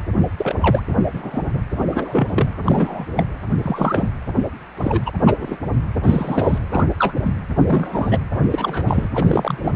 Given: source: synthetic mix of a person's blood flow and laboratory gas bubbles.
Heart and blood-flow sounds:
Doppler ultrasound of blood flow; precordium
0.36-0.55 s: bubbles
0.61-0.82 s: bubbles
1.06-1.10 s: bubbles
1.14-1.61 s: bubbles
1.77-2.27 s: bubbles
2.30-2.49 s: bubbles
2.65-3.06 s: bubbles
3.17-3.24 s: bubbles
3.62-4.09 s: bubbles
4.77-5.03 s: bubbles
5.05-5.12 s: bubbles
5.23-5.58 s: bubbles
6.03-6.59 s: bubbles
6.70-6.87 s: bubbles
6.99-7.13 s: bubbles
7.24-7.33 s: bubbles
7.67-8.19 s: bubbles
8.33-8.39 s: bubbles
8.50-9.08 s: bubbles
9.13-9.73 s: bubbles
From the record:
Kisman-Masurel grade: 242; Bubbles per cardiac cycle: several, 3 to 8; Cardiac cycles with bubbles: 100%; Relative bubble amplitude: moderate (0.250 to 0.450); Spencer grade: 3 (all of the cardiac periods contain showers or single bubble signals, but not dominating or overriding the cardiac motion signals); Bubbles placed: anywhere in the cardiac cycle

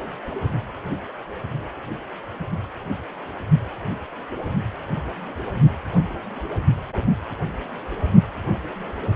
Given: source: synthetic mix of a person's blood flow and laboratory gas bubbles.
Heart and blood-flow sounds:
Doppler ultrasound of blood flow; precordium
no bubbles
From the record:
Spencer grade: 0 (complete lack of bubble signals)

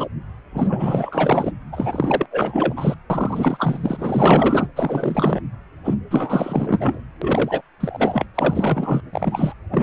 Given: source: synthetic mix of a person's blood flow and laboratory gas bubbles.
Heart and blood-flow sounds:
Doppler ultrasound of blood flow; precordium
0.00-0.06 s: bubbles
0.52-1.52 s: bubbles
1.72-2.26 s: bubbles
2.31-2.95 s: bubbles
3.10-4.67 s: bubbles
4.75-5.40 s: bubbles
5.84-5.95 s: bubbles
6.11-7.01 s: bubbles
7.21-7.62 s: bubbles
7.80-8.26 s: bubbles
8.35-9.02 s: bubbles
9.12-9.54 s: bubbles
9.71-9.83 s: bubbles
From the record:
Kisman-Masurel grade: 444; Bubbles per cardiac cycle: continuous sound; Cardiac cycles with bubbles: 100%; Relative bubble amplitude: maximal (0.775 to 0.999); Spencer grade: 4 (maximum detectable bubble signal sounding continuously throughout systole and diastole of every cardiac period, and overriding the amplitude of the normal cardiac signals); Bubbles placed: anywhere in the cardiac cycle

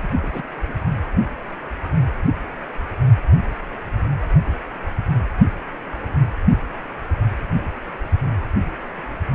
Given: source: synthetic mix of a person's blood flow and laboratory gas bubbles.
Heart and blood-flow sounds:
Doppler ultrasound of blood flow; precordium
0.03-0.08 s: bubbles
0.21-0.47 s: bubbles
0.67-0.73 s: bubbles
From the record:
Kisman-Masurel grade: 211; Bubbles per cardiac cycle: several, 3 to 8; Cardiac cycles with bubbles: 1 to 10%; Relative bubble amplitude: barely perceptible (0.100 to 0.250); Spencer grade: 1 (occasional bubble signal discernible with the cardiac motion signal, with majority of cardiac periods free of bubbles); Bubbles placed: anywhere in the cardiac cycle

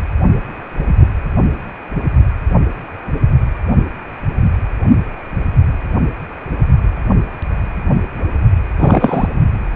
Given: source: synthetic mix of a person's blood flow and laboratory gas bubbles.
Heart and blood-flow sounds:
Doppler ultrasound of blood flow; precordium
8.79-9.28 s: bubbles
From the record:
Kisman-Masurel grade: 113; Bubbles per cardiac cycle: 1 to 2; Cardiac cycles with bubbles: 1 to 10%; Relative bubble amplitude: loud (0.450 to 0.775); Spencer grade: 1 (occasional bubble signal discernible with the cardiac motion signal, with majority of cardiac periods free of bubbles); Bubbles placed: anywhere in the cardiac cycle

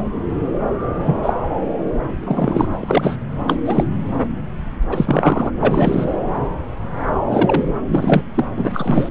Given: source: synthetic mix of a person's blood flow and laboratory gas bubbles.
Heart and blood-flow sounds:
Doppler ultrasound of blood flow; subclavian vein
0.99-1.33 s: bubbles
2.25-2.67 s: bubbles
2.70-3.18 s: bubbles
3.46-3.56 s: bubbles
3.65-3.84 s: bubbles
4.89-5.51 s: bubbles
5.61-6.16 s: bubbles
7.30-7.64 s: bubbles
7.88-8.22 s: bubbles
8.35-8.45 s: bubbles
8.55-9.09 s: bubbles
From the record:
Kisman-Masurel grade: 233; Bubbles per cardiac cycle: several, 3 to 8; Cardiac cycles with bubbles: 50 to 99%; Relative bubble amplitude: loud (0.450 to 0.775); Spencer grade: 3 (all of the cardiac periods contain showers or single bubble signals, but not dominating or overriding the cardiac motion signals); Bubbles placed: anywhere in the cardiac cycle

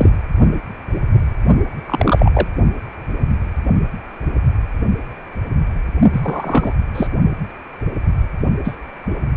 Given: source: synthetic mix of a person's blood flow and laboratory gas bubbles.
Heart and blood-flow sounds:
Doppler ultrasound of blood flow; precordium
0.00-0.09 s: bubbles
1.86-2.47 s: bubbles
6.12-6.73 s: bubbles
6.94-7.07 s: bubbles
8.65-8.77 s: bubbles
9.10-9.15 s: bubbles
From the record:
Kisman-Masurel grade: 223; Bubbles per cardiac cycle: several, 3 to 8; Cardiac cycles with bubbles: 10 to 50%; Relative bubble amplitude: loud (0.450 to 0.775); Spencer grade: 2 (many but less than half of the cardiac periods contain bubble signals, singularly or in groups); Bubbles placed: only in the low amplitude regions of the cardiac cycle

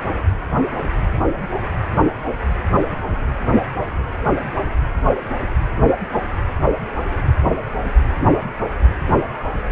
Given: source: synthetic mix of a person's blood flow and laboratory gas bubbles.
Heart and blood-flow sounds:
Doppler ultrasound of blood flow; precordium
no bubbles
From the record:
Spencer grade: 0 (complete lack of bubble signals)

